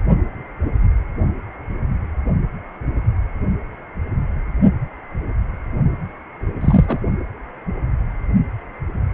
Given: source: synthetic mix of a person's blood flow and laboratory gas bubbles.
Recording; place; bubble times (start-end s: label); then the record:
Doppler ultrasound of blood flow; precordium
6.61-6.99 s: bubbles
From the record:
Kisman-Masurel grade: 113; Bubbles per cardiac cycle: 1 to 2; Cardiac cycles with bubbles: 1 to 10%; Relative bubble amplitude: loud (0.450 to 0.775); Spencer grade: 1 (occasional bubble signal discernible with the cardiac motion signal, with majority of cardiac periods free of bubbles); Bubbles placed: only in the low amplitude regions of the cardiac cycle